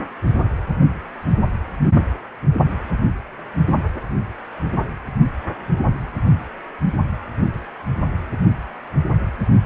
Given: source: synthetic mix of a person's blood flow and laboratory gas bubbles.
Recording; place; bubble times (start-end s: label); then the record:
Doppler ultrasound of blood flow; precordium
no bubbles
From the record:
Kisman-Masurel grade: 000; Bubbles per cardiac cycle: 0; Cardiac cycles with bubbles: 0%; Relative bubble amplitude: no bubbles discernible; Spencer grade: 0 (complete lack of bubble signals)